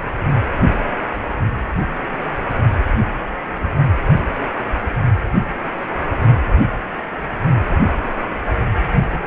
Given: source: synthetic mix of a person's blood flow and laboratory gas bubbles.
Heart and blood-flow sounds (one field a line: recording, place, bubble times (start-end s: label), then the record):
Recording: Doppler ultrasound of blood flow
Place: precordium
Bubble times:
4.43-4.47 s: bubbles
7.87-7.93 s: bubbles
8.27-8.40 s: bubbles
8.96-9.24 s: bubbles
From the record:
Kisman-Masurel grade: 121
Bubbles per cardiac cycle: 1 to 2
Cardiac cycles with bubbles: 10 to 50%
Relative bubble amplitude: barely perceptible (0.100 to 0.250)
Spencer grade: 2 (many but less than half of the cardiac periods contain bubble signals, singularly or in groups)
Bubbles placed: anywhere in the cardiac cycle